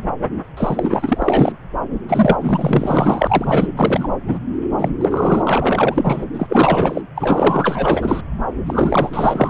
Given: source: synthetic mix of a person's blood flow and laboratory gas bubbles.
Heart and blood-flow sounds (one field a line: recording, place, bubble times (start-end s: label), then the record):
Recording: Doppler ultrasound of blood flow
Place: subclavian vein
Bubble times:
0.57-1.52 s: bubbles
2.08-2.36 s: bubbles
2.40-3.71 s: bubbles
3.75-4.08 s: bubbles
4.27-4.39 s: bubbles
4.78-4.93 s: bubbles
5.01-6.25 s: bubbles
6.35-7.02 s: bubbles
7.15-8.21 s: bubbles
8.67-9.50 s: bubbles
From the record:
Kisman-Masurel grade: 444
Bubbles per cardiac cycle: continuous sound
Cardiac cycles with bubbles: 100%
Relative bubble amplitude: maximal (0.775 to 0.999)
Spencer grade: 4 (maximum detectable bubble signal sounding continuously throughout systole and diastole of every cardiac period, and overriding the amplitude of the normal cardiac signals)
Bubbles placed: anywhere in the cardiac cycle